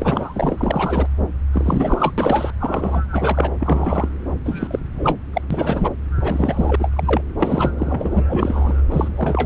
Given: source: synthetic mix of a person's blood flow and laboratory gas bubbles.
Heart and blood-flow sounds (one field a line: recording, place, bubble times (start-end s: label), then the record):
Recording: Doppler ultrasound of blood flow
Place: subclavian vein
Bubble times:
0.00-1.07 s: bubbles
1.52-2.14 s: bubbles
2.17-2.50 s: bubbles
2.59-3.02 s: bubbles
3.12-3.50 s: bubbles
3.59-4.10 s: bubbles
4.45-4.79 s: bubbles
4.95-5.18 s: bubbles
5.33-5.42 s: bubbles
5.51-5.90 s: bubbles
6.20-6.76 s: bubbles
6.79-6.91 s: bubbles
6.95-7.22 s: bubbles
7.39-7.71 s: bubbles
7.78-8.23 s: bubbles
8.29-8.74 s: bubbles
8.91-9.46 s: bubbles
From the record:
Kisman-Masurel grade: 243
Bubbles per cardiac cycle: several, 3 to 8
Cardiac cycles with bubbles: 100%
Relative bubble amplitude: loud (0.450 to 0.775)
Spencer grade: 3 (all of the cardiac periods contain showers or single bubble signals, but not dominating or overriding the cardiac motion signals)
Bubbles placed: anywhere in the cardiac cycle